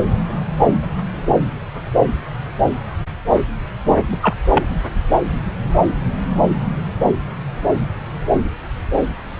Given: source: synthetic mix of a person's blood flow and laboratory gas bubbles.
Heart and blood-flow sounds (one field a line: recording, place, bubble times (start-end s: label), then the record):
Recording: Doppler ultrasound of blood flow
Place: subclavian vein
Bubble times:
3.87-4.01 s: bubbles
4.12-4.18 s: bubbles
4.22-4.36 s: bubbles
4.54-4.64 s: bubbles
From the record:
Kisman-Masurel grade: 213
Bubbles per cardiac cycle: several, 3 to 8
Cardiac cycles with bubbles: 1 to 10%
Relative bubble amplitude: loud (0.450 to 0.775)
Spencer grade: 1 (occasional bubble signal discernible with the cardiac motion signal, with majority of cardiac periods free of bubbles)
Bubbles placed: anywhere in the cardiac cycle